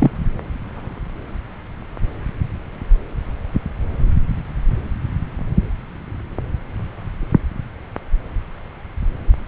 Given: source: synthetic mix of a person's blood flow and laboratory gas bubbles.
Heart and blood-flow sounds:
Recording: Doppler ultrasound of blood flow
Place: subclavian vein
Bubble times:
0.00-0.11 s: bubbles
From the record:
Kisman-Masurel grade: 113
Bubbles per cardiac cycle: 1 to 2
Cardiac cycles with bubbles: 1 to 10%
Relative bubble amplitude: loud (0.450 to 0.775)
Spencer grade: 1 (occasional bubble signal discernible with the cardiac motion signal, with majority of cardiac periods free of bubbles)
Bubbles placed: anywhere in the cardiac cycle

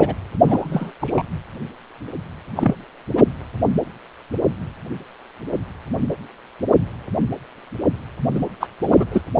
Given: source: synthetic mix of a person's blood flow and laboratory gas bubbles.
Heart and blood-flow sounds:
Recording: Doppler ultrasound of blood flow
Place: precordium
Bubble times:
0.00-0.15 s: bubbles
0.48-0.92 s: bubbles
1.01-1.22 s: bubbles
2.56-2.77 s: bubbles
3.15-3.28 s: bubbles
8.34-8.40 s: bubbles
8.60-8.68 s: bubbles
8.80-9.05 s: bubbles
9.11-9.21 s: bubbles
From the record:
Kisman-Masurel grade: 223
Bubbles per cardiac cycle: several, 3 to 8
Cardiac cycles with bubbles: 10 to 50%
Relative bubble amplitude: loud (0.450 to 0.775)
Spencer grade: 2 (many but less than half of the cardiac periods contain bubble signals, singularly or in groups)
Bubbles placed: anywhere in the cardiac cycle

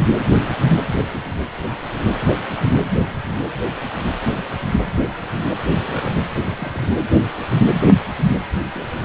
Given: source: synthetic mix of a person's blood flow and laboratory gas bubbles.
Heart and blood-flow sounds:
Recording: Doppler ultrasound of blood flow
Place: precordium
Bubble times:
0.69-0.73 s: bubbles
1.00-1.08 s: bubbles
4.42-4.48 s: bubbles
5.84-6.18 s: bubbles
6.46-6.89 s: bubbles
8.58-8.66 s: bubbles
8.71-8.88 s: bubbles
From the record:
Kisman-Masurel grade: 121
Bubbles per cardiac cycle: 1 to 2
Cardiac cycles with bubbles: 10 to 50%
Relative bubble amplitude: barely perceptible (0.100 to 0.250)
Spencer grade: 2 (many but less than half of the cardiac periods contain bubble signals, singularly or in groups)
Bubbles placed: anywhere in the cardiac cycle

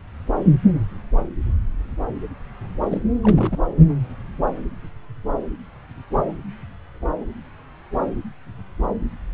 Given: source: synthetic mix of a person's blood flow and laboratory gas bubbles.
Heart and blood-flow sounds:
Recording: Doppler ultrasound of blood flow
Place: subclavian vein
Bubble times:
2.81-3.02 s: bubbles
3.23-3.58 s: bubbles
From the record:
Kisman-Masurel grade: 211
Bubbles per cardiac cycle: several, 3 to 8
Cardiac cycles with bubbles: 1 to 10%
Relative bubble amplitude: barely perceptible (0.100 to 0.250)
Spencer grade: 1 (occasional bubble signal discernible with the cardiac motion signal, with majority of cardiac periods free of bubbles)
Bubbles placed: anywhere in the cardiac cycle

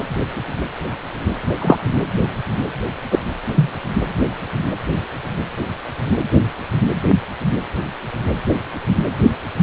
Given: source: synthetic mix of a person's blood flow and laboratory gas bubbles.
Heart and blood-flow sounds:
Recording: Doppler ultrasound of blood flow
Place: precordium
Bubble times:
1.61-1.77 s: bubbles
3.10-3.19 s: bubbles
3.56-3.71 s: bubbles
From the record:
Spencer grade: 2 (many but less than half of the cardiac periods contain bubble signals, singularly or in groups)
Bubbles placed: anywhere in the cardiac cycle

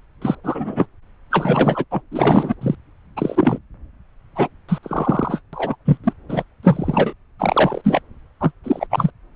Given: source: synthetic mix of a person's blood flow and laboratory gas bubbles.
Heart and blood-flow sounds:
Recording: Doppler ultrasound of blood flow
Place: subclavian vein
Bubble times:
0.21-0.35 s: bubbles
0.44-0.86 s: bubbles
1.30-1.85 s: bubbles
1.91-2.01 s: bubbles
2.12-2.54 s: bubbles
2.61-2.75 s: bubbles
3.17-3.59 s: bubbles
4.36-4.48 s: bubbles
4.69-4.79 s: bubbles
4.82-5.39 s: bubbles
5.53-5.76 s: bubbles
5.85-5.97 s: bubbles
6.04-6.13 s: bubbles
6.29-6.44 s: bubbles
6.63-7.13 s: bubbles
7.39-7.81 s: bubbles
7.84-8.01 s: bubbles
8.40-8.51 s: bubbles
8.63-8.87 s: bubbles
8.90-9.11 s: bubbles
From the record:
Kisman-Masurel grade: 233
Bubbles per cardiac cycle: several, 3 to 8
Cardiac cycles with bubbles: 50 to 99%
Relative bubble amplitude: loud (0.450 to 0.775)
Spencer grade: 3 (all of the cardiac periods contain showers or single bubble signals, but not dominating or overriding the cardiac motion signals)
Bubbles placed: anywhere in the cardiac cycle

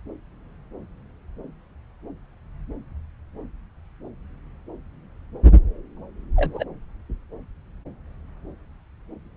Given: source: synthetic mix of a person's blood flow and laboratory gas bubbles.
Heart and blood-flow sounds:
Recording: Doppler ultrasound of blood flow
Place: subclavian vein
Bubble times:
6.36-6.64 s: bubbles
From the record:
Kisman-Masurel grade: 112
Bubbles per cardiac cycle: 1 to 2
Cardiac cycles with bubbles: 1 to 10%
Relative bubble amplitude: moderate (0.250 to 0.450)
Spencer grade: 1 (occasional bubble signal discernible with the cardiac motion signal, with majority of cardiac periods free of bubbles)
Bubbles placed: anywhere in the cardiac cycle

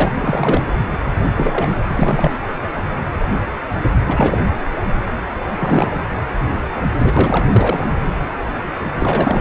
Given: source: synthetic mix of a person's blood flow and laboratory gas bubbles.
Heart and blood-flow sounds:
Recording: Doppler ultrasound of blood flow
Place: precordium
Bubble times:
0.00-0.12 s: bubbles
0.21-0.68 s: bubbles
1.34-1.81 s: bubbles
1.90-2.31 s: bubbles
4.07-4.38 s: bubbles
5.58-6.01 s: bubbles
7.02-7.48 s: bubbles
7.54-7.95 s: bubbles
8.99-9.41 s: bubbles
From the record:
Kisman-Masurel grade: 332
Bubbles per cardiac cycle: rolling drumbeat, 9 or more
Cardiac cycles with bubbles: 50 to 99%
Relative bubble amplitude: moderate (0.250 to 0.450)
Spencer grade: 3 (all of the cardiac periods contain showers or single bubble signals, but not dominating or overriding the cardiac motion signals)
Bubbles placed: anywhere in the cardiac cycle

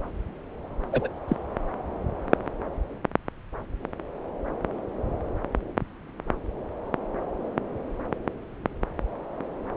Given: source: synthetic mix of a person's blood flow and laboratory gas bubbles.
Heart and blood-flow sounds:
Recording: Doppler ultrasound of blood flow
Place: subclavian vein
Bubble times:
0.92-1.08 s: bubbles
1.28-1.36 s: bubbles
From the record:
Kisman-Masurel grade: 112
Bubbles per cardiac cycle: 1 to 2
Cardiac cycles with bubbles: 1 to 10%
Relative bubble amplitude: moderate (0.250 to 0.450)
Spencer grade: 1 (occasional bubble signal discernible with the cardiac motion signal, with majority of cardiac periods free of bubbles)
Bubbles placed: anywhere in the cardiac cycle

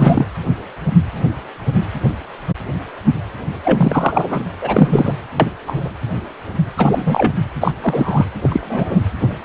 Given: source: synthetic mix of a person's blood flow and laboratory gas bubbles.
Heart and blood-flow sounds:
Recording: Doppler ultrasound of blood flow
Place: precordium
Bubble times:
0.00-0.27 s: bubbles
3.64-4.42 s: bubbles
4.62-5.13 s: bubbles
5.40-5.49 s: bubbles
5.67-5.88 s: bubbles
6.78-7.32 s: bubbles
7.61-7.71 s: bubbles
7.82-8.24 s: bubbles
8.42-9.04 s: bubbles
9.21-9.37 s: bubbles
From the record:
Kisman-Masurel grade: 233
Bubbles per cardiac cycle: several, 3 to 8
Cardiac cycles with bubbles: 50 to 99%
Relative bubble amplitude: loud (0.450 to 0.775)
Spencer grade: 3 (all of the cardiac periods contain showers or single bubble signals, but not dominating or overriding the cardiac motion signals)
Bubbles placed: anywhere in the cardiac cycle

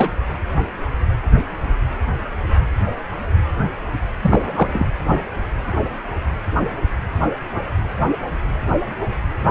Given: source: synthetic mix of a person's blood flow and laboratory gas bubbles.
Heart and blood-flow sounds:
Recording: Doppler ultrasound of blood flow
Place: precordium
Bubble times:
0.00-0.10 s: bubbles
4.21-4.87 s: bubbles
From the record:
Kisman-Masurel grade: 222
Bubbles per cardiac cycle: several, 3 to 8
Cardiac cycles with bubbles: 10 to 50%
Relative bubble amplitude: moderate (0.250 to 0.450)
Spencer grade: 2 (many but less than half of the cardiac periods contain bubble signals, singularly or in groups)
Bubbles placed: anywhere in the cardiac cycle

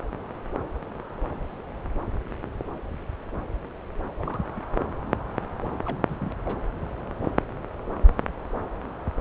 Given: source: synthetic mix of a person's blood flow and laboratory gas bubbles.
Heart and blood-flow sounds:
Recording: Doppler ultrasound of blood flow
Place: subclavian vein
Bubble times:
4.19-4.40 s: bubbles
4.55-4.61 s: bubbles
5.85-5.96 s: bubbles
6.08-6.36 s: bubbles
6.39-6.57 s: bubbles
From the record:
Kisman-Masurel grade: 221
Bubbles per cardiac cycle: several, 3 to 8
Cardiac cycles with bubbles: 10 to 50%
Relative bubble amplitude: barely perceptible (0.100 to 0.250)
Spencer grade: 2 (many but less than half of the cardiac periods contain bubble signals, singularly or in groups)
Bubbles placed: anywhere in the cardiac cycle

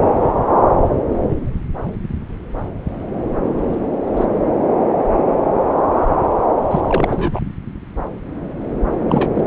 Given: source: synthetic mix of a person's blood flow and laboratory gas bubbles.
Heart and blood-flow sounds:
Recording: Doppler ultrasound of blood flow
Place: subclavian vein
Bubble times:
3.57-3.62 s: bubbles
3.69-3.77 s: bubbles
4.17-4.25 s: bubbles
6.71-7.42 s: bubbles
9.06-9.30 s: bubbles
9.35-9.46 s: bubbles
From the record:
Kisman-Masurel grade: 222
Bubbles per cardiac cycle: several, 3 to 8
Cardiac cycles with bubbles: 10 to 50%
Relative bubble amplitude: moderate (0.250 to 0.450)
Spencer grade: 2 (many but less than half of the cardiac periods contain bubble signals, singularly or in groups)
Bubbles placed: anywhere in the cardiac cycle

